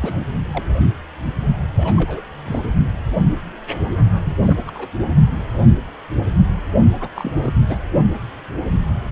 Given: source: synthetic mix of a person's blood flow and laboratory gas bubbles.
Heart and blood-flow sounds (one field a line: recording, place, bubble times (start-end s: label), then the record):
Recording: Doppler ultrasound of blood flow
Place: precordium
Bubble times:
0.02-0.15 s: bubbles
0.20-0.25 s: bubbles
0.52-0.64 s: bubbles
1.76-2.21 s: bubbles
2.44-2.59 s: bubbles
4.23-4.38 s: bubbles
4.46-4.56 s: bubbles
4.66-4.71 s: bubbles
4.75-4.88 s: bubbles
7.00-7.08 s: bubbles
7.15-7.32 s: bubbles
7.38-7.52 s: bubbles
7.69-7.78 s: bubbles
From the record:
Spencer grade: 2 (many but less than half of the cardiac periods contain bubble signals, singularly or in groups)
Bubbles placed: only in the low amplitude regions of the cardiac cycle